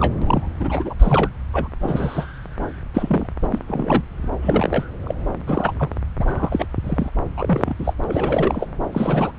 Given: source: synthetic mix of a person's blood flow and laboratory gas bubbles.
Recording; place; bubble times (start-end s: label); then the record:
Doppler ultrasound of blood flow; subclavian vein
0.00-0.13 s: bubbles
0.22-0.48 s: bubbles
0.59-0.93 s: bubbles
0.99-1.29 s: bubbles
1.53-1.68 s: bubbles
1.80-2.26 s: bubbles
2.94-3.27 s: bubbles
3.43-3.59 s: bubbles
3.67-4.02 s: bubbles
4.42-4.84 s: bubbles
5.04-5.14 s: bubbles
5.46-5.72 s: bubbles
5.79-5.88 s: bubbles
6.19-6.65 s: bubbles
6.84-7.09 s: bubbles
7.37-7.74 s: bubbles
7.79-7.93 s: bubbles
8.04-8.67 s: bubbles
8.92-9.31 s: bubbles
From the record:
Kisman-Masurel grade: 242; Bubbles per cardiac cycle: several, 3 to 8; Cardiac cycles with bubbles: 100%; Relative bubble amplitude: moderate (0.250 to 0.450); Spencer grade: 3 (all of the cardiac periods contain showers or single bubble signals, but not dominating or overriding the cardiac motion signals); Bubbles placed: anywhere in the cardiac cycle